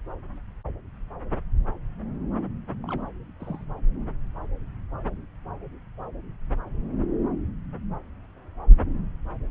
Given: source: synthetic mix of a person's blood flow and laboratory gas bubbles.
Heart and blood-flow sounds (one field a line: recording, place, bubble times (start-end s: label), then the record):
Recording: Doppler ultrasound of blood flow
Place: subclavian vein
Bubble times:
2.84-3.02 s: bubbles
3.40-3.65 s: bubbles
From the record:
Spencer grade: 1 (occasional bubble signal discernible with the cardiac motion signal, with majority of cardiac periods free of bubbles)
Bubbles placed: anywhere in the cardiac cycle